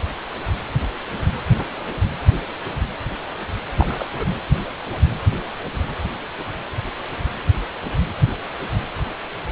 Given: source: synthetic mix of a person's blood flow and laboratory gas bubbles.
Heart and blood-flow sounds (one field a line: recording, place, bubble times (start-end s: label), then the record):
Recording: Doppler ultrasound of blood flow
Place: precordium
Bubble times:
3.76-4.27 s: bubbles
From the record:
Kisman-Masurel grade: 211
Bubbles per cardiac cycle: several, 3 to 8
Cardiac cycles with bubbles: 1 to 10%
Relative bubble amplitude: barely perceptible (0.100 to 0.250)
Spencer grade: 1 (occasional bubble signal discernible with the cardiac motion signal, with majority of cardiac periods free of bubbles)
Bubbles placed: anywhere in the cardiac cycle